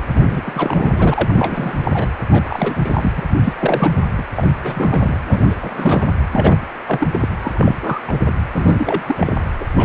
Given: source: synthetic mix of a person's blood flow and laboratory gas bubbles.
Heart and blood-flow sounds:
Doppler ultrasound of blood flow; precordium
0.14-0.42 s: bubbles
0.46-1.75 s: bubbles
1.84-2.08 s: bubbles
2.30-3.12 s: bubbles
3.16-3.24 s: bubbles
3.44-3.92 s: bubbles
4.17-4.25 s: bubbles
4.36-4.49 s: bubbles
4.62-5.18 s: bubbles
5.25-5.55 s: bubbles
5.59-6.11 s: bubbles
6.33-6.57 s: bubbles
6.86-7.08 s: bubbles
7.11-7.29 s: bubbles
7.42-7.52 s: bubbles
7.54-7.75 s: bubbles
7.83-8.02 s: bubbles
8.07-8.32 s: bubbles
8.53-9.49 s: bubbles
9.60-9.65 s: bubbles
9.76-9.85 s: bubbles
From the record:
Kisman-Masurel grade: 342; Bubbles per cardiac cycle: rolling drumbeat, 9 or more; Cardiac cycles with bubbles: 100%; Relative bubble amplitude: moderate (0.250 to 0.450); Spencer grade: 3 (all of the cardiac periods contain showers or single bubble signals, but not dominating or overriding the cardiac motion signals); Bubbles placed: anywhere in the cardiac cycle

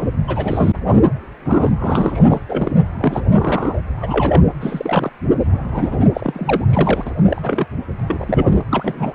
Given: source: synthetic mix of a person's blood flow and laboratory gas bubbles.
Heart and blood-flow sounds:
Doppler ultrasound of blood flow; precordium
0.00-0.06 s: bubbles
0.27-0.72 s: bubbles
1.46-1.69 s: bubbles
1.79-2.40 s: bubbles
2.48-2.71 s: bubbles
3.00-3.23 s: bubbles
3.33-3.81 s: bubbles
4.01-4.41 s: bubbles
4.61-5.10 s: bubbles
5.51-5.96 s: bubbles
6.13-6.64 s: bubbles
6.70-7.11 s: bubbles
7.27-7.66 s: bubbles
7.98-8.46 s: bubbles
8.48-8.62 s: bubbles
8.71-9.14 s: bubbles
From the record:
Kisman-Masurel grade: 242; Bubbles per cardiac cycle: several, 3 to 8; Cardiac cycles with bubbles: 100%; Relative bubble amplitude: moderate (0.250 to 0.450); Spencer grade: 3 (all of the cardiac periods contain showers or single bubble signals, but not dominating or overriding the cardiac motion signals); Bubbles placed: anywhere in the cardiac cycle

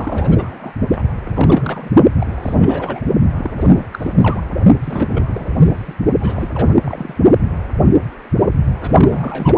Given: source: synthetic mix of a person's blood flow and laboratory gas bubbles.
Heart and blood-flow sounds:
Doppler ultrasound of blood flow; precordium
0.00-0.73 s: bubbles
0.91-1.03 s: bubbles
1.25-1.91 s: bubbles
2.19-2.27 s: bubbles
2.30-3.03 s: bubbles
3.36-3.85 s: bubbles
3.93-4.12 s: bubbles
4.17-4.43 s: bubbles
4.81-5.50 s: bubbles
5.63-5.95 s: bubbles
6.21-6.49 s: bubbles
6.54-6.75 s: bubbles
6.83-7.15 s: bubbles
8.80-9.58 s: bubbles
From the record:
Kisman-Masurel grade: 332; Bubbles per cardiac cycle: rolling drumbeat, 9 or more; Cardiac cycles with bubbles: 50 to 99%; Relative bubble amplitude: moderate (0.250 to 0.450); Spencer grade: 3 (all of the cardiac periods contain showers or single bubble signals, but not dominating or overriding the cardiac motion signals); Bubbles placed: only in the low amplitude regions of the cardiac cycle

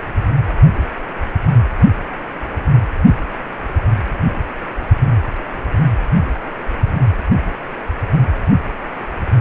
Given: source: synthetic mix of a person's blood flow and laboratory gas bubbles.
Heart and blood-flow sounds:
Doppler ultrasound of blood flow; precordium
no bubbles
From the record:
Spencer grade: 0 (complete lack of bubble signals)

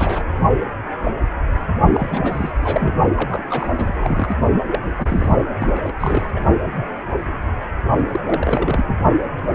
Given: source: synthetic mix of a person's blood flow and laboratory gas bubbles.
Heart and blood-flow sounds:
Doppler ultrasound of blood flow; precordium
0.00-0.23 s: bubbles
1.94-2.52 s: bubbles
2.61-2.94 s: bubbles
3.16-3.45 s: bubbles
3.50-3.69 s: bubbles
3.77-4.37 s: bubbles
4.72-4.80 s: bubbles
4.86-4.93 s: bubbles
4.98-5.42 s: bubbles
5.60-5.92 s: bubbles
6.00-6.22 s: bubbles
6.36-6.44 s: bubbles
8.13-8.20 s: bubbles
8.26-8.95 s: bubbles
From the record:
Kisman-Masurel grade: 332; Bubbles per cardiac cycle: rolling drumbeat, 9 or more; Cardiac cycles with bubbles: 50 to 99%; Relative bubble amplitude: moderate (0.250 to 0.450); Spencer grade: 3 (all of the cardiac periods contain showers or single bubble signals, but not dominating or overriding the cardiac motion signals); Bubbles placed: only in the low amplitude regions of the cardiac cycle

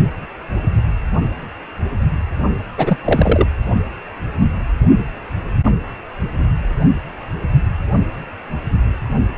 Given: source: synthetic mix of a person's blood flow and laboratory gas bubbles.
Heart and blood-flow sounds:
Doppler ultrasound of blood flow; precordium
2.77-2.97 s: bubbles
3.04-3.46 s: bubbles
From the record:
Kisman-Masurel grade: 213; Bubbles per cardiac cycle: several, 3 to 8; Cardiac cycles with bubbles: 1 to 10%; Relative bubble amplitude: loud (0.450 to 0.775); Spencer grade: 1 (occasional bubble signal discernible with the cardiac motion signal, with majority of cardiac periods free of bubbles); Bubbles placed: only in the low amplitude regions of the cardiac cycle

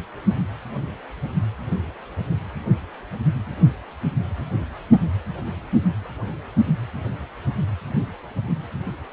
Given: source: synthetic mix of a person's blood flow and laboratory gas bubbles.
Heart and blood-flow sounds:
Doppler ultrasound of blood flow; precordium
no bubbles
From the record:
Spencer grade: 0 (complete lack of bubble signals)

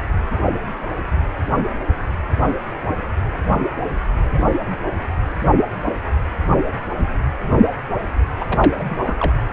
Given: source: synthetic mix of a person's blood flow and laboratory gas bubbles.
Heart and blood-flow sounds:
Doppler ultrasound of blood flow; precordium
8.39-8.44 s: bubbles
8.49-8.84 s: bubbles
8.88-8.97 s: bubbles
9.05-9.14 s: bubbles
9.20-9.33 s: bubbles
From the record:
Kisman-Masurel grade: 212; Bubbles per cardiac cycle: several, 3 to 8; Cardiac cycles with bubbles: 1 to 10%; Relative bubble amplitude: moderate (0.250 to 0.450); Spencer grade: 1 (occasional bubble signal discernible with the cardiac motion signal, with majority of cardiac periods free of bubbles); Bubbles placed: anywhere in the cardiac cycle

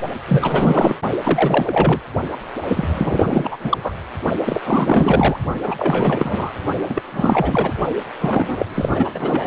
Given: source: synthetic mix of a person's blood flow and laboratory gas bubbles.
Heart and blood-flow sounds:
Doppler ultrasound of blood flow; precordium
0.27-0.97 s: bubbles
1.24-2.00 s: bubbles
2.68-3.58 s: bubbles
3.63-3.93 s: bubbles
4.45-4.61 s: bubbles
4.64-5.37 s: bubbles
5.63-6.50 s: bubbles
6.89-7.03 s: bubbles
7.11-7.74 s: bubbles
8.19-8.66 s: bubbles
8.74-9.09 s: bubbles
9.14-9.47 s: bubbles
From the record:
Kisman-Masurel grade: 444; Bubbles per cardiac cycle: continuous sound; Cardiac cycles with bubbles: 100%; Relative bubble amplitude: maximal (0.775 to 0.999); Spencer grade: 4 (maximum detectable bubble signal sounding continuously throughout systole and diastole of every cardiac period, and overriding the amplitude of the normal cardiac signals); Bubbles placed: only in the low amplitude regions of the cardiac cycle

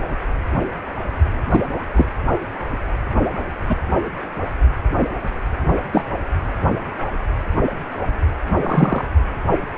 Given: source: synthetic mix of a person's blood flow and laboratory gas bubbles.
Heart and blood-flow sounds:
Doppler ultrasound of blood flow; precordium
1.50-1.61 s: bubbles
1.94-2.06 s: bubbles
3.69-3.76 s: bubbles
5.92-6.04 s: bubbles
8.56-9.07 s: bubbles
From the record:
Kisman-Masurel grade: 122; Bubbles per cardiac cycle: 1 to 2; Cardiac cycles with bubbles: 10 to 50%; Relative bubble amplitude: moderate (0.250 to 0.450); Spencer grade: 2 (many but less than half of the cardiac periods contain bubble signals, singularly or in groups); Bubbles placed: only in the low amplitude regions of the cardiac cycle

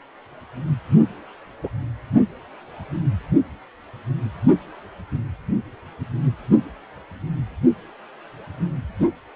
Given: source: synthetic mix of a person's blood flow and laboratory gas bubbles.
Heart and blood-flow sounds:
Doppler ultrasound of blood flow; precordium
1.63-1.69 s: bubbles
9.00-9.07 s: bubbles
From the record:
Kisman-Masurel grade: 122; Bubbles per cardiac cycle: 1 to 2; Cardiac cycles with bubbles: 10 to 50%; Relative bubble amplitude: moderate (0.250 to 0.450); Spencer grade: 2 (many but less than half of the cardiac periods contain bubble signals, singularly or in groups); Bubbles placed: anywhere in the cardiac cycle

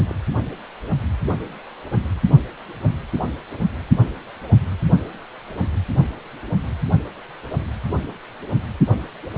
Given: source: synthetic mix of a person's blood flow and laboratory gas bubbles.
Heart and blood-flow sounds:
Doppler ultrasound of blood flow; precordium
0.06-0.14 s: bubbles
From the record:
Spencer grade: 2 (many but less than half of the cardiac periods contain bubble signals, singularly or in groups); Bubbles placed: anywhere in the cardiac cycle

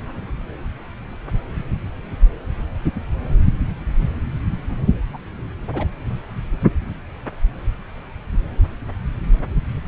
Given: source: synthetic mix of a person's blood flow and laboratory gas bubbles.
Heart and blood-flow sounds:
Doppler ultrasound of blood flow; subclavian vein
5.13-5.17 s: bubbles
5.74-5.86 s: bubbles
From the record:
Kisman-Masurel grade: 112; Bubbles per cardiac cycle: 1 to 2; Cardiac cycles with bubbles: 1 to 10%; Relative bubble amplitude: moderate (0.250 to 0.450); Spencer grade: 1 (occasional bubble signal discernible with the cardiac motion signal, with majority of cardiac periods free of bubbles); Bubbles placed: anywhere in the cardiac cycle

